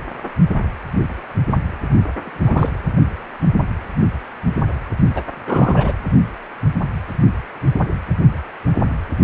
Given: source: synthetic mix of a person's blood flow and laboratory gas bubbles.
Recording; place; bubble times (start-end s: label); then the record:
Doppler ultrasound of blood flow; precordium
2.25-2.71 s: bubbles
5.14-5.22 s: bubbles
5.46-5.93 s: bubbles
From the record:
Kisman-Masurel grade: 222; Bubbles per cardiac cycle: several, 3 to 8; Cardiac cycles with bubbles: 10 to 50%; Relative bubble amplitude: moderate (0.250 to 0.450); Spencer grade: 2 (many but less than half of the cardiac periods contain bubble signals, singularly or in groups); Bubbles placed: anywhere in the cardiac cycle